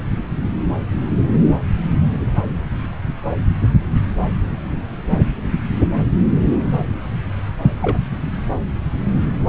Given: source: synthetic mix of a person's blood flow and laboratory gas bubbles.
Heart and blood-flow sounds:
Doppler ultrasound of blood flow; subclavian vein
7.82-7.99 s: bubbles
From the record:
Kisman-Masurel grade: 112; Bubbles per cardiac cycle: 1 to 2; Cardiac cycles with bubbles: 1 to 10%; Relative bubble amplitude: moderate (0.250 to 0.450); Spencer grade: 1 (occasional bubble signal discernible with the cardiac motion signal, with majority of cardiac periods free of bubbles); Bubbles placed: anywhere in the cardiac cycle

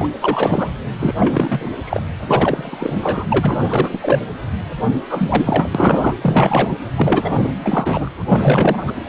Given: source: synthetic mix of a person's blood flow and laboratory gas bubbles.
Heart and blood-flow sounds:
Doppler ultrasound of blood flow; precordium
0.00-0.08 s: bubbles
0.20-0.71 s: bubbles
0.99-1.14 s: bubbles
1.18-1.59 s: bubbles
1.85-2.02 s: bubbles
2.26-2.94 s: bubbles
2.99-3.25 s: bubbles
3.29-3.62 s: bubbles
3.68-3.99 s: bubbles
4.02-4.19 s: bubbles
5.08-5.70 s: bubbles
5.75-6.13 s: bubbles
6.21-6.78 s: bubbles
6.96-7.53 s: bubbles
7.64-8.10 s: bubbles
8.28-8.92 s: bubbles
From the record:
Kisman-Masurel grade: 343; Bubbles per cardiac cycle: rolling drumbeat, 9 or more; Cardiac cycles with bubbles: 100%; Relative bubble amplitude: loud (0.450 to 0.775); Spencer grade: 3 (all of the cardiac periods contain showers or single bubble signals, but not dominating or overriding the cardiac motion signals); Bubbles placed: anywhere in the cardiac cycle

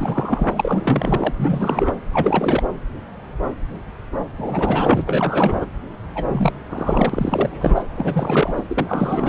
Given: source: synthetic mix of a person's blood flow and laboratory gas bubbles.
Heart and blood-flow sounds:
Doppler ultrasound of blood flow; subclavian vein
0.00-1.34 s: bubbles
1.39-1.94 s: bubbles
2.12-2.63 s: bubbles
4.37-5.03 s: bubbles
5.06-5.65 s: bubbles
6.15-6.25 s: bubbles
6.29-6.52 s: bubbles
6.69-7.84 s: bubbles
7.96-8.55 s: bubbles
8.58-8.62 s: bubbles
8.68-9.29 s: bubbles
From the record:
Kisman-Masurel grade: 333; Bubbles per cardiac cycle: rolling drumbeat, 9 or more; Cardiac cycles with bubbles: 50 to 99%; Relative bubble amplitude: loud (0.450 to 0.775); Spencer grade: 3 (all of the cardiac periods contain showers or single bubble signals, but not dominating or overriding the cardiac motion signals); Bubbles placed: anywhere in the cardiac cycle

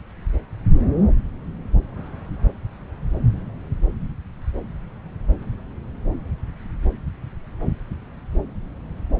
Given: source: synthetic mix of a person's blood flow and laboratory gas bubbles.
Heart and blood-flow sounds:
Doppler ultrasound of blood flow; subclavian vein
no bubbles
From the record:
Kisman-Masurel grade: 000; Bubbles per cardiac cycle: 0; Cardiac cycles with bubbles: 0%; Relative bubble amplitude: no bubbles discernible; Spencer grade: 0 (complete lack of bubble signals)

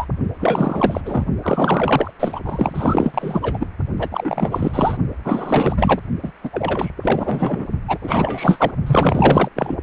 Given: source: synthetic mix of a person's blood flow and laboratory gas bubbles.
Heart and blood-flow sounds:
Doppler ultrasound of blood flow; precordium
0.00-0.06 s: bubbles
0.39-1.00 s: bubbles
1.04-1.25 s: bubbles
1.42-2.11 s: bubbles
2.19-2.42 s: bubbles
2.46-3.67 s: bubbles
3.99-4.97 s: bubbles
5.25-6.00 s: bubbles
6.22-6.31 s: bubbles
6.42-6.91 s: bubbles
7.01-7.67 s: bubbles
7.88-7.98 s: bubbles
8.03-8.71 s: bubbles
8.86-9.48 s: bubbles
9.55-9.76 s: bubbles
From the record:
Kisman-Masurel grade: 444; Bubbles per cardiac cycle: continuous sound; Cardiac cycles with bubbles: 100%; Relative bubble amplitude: maximal (0.775 to 0.999); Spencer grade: 4 (maximum detectable bubble signal sounding continuously throughout systole and diastole of every cardiac period, and overriding the amplitude of the normal cardiac signals); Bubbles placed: only in the low amplitude regions of the cardiac cycle

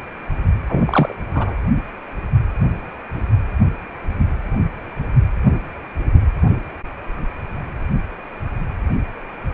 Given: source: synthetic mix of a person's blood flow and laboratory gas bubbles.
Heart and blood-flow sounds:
Doppler ultrasound of blood flow; precordium
0.69-1.12 s: bubbles
1.34-1.55 s: bubbles
From the record:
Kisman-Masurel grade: 212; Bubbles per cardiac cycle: several, 3 to 8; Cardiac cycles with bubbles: 1 to 10%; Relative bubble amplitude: moderate (0.250 to 0.450); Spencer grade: 1 (occasional bubble signal discernible with the cardiac motion signal, with majority of cardiac periods free of bubbles); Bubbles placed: anywhere in the cardiac cycle

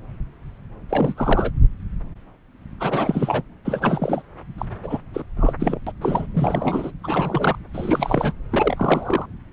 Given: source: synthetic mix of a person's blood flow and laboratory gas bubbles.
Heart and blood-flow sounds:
Doppler ultrasound of blood flow; subclavian vein
0.89-1.14 s: bubbles
1.17-1.51 s: bubbles
2.80-3.42 s: bubbles
3.65-4.22 s: bubbles
4.58-4.65 s: bubbles
4.83-5.00 s: bubbles
5.13-5.23 s: bubbles
5.36-5.54 s: bubbles
5.60-5.79 s: bubbles
5.86-5.92 s: bubbles
6.01-6.26 s: bubbles
6.34-6.92 s: bubbles
7.03-7.57 s: bubbles
7.73-8.33 s: bubbles
8.53-9.26 s: bubbles
From the record:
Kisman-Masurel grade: 332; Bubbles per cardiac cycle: rolling drumbeat, 9 or more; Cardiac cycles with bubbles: 50 to 99%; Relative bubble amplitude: moderate (0.250 to 0.450); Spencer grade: 3 (all of the cardiac periods contain showers or single bubble signals, but not dominating or overriding the cardiac motion signals); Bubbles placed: anywhere in the cardiac cycle

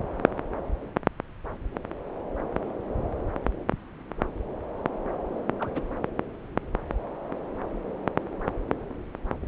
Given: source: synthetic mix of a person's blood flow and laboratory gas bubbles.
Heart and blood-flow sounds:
Doppler ultrasound of blood flow; subclavian vein
5.59-5.69 s: bubbles
5.75-5.80 s: bubbles
From the record:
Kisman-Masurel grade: 111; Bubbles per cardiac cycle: 1 to 2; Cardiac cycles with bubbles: 1 to 10%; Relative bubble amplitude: barely perceptible (0.100 to 0.250); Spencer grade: 1 (occasional bubble signal discernible with the cardiac motion signal, with majority of cardiac periods free of bubbles); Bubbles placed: anywhere in the cardiac cycle

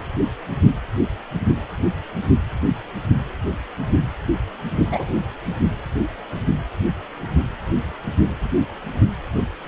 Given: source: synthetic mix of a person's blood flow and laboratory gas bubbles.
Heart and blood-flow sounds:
Doppler ultrasound of blood flow; precordium
4.91-5.13 s: bubbles
From the record:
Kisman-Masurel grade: 112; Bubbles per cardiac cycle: 1 to 2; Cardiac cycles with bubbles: 1 to 10%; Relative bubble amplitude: moderate (0.250 to 0.450); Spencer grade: 1 (occasional bubble signal discernible with the cardiac motion signal, with majority of cardiac periods free of bubbles); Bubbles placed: only in the low amplitude regions of the cardiac cycle

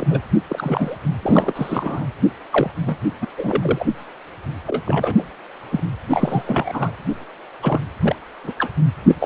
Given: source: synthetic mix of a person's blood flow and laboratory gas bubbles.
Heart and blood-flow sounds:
Doppler ultrasound of blood flow; precordium
0.00-0.05 s: bubbles
0.10-0.21 s: bubbles
0.49-0.96 s: bubbles
1.22-2.06 s: bubbles
2.52-2.71 s: bubbles
2.86-2.97 s: bubbles
3.21-3.26 s: bubbles
3.37-3.86 s: bubbles
4.67-4.83 s: bubbles
4.85-5.24 s: bubbles
5.71-5.80 s: bubbles
6.09-6.91 s: bubbles
7.62-7.81 s: bubbles
8.02-8.16 s: bubbles
8.44-8.52 s: bubbles
8.59-8.71 s: bubbles
9.08-9.15 s: bubbles
9.20-9.25 s: bubbles
From the record:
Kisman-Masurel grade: 242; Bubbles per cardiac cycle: several, 3 to 8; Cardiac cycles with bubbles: 100%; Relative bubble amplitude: moderate (0.250 to 0.450); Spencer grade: 3 (all of the cardiac periods contain showers or single bubble signals, but not dominating or overriding the cardiac motion signals); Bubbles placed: anywhere in the cardiac cycle

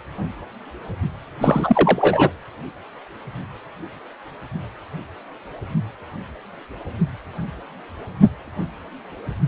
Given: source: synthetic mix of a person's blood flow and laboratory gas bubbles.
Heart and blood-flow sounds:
Doppler ultrasound of blood flow; precordium
1.41-2.31 s: bubbles
From the record:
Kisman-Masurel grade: 213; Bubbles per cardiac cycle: several, 3 to 8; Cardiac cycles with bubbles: 1 to 10%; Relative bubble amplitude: loud (0.450 to 0.775); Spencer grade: 1 (occasional bubble signal discernible with the cardiac motion signal, with majority of cardiac periods free of bubbles); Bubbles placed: anywhere in the cardiac cycle

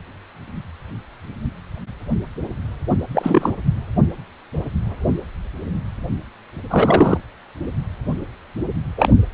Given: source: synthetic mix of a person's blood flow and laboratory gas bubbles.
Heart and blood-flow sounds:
Doppler ultrasound of blood flow; precordium
3.12-3.53 s: bubbles
6.70-7.17 s: bubbles
8.97-9.12 s: bubbles
From the record:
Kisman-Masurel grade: 223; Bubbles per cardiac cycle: several, 3 to 8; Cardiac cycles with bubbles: 10 to 50%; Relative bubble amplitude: loud (0.450 to 0.775); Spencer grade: 2 (many but less than half of the cardiac periods contain bubble signals, singularly or in groups); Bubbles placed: anywhere in the cardiac cycle

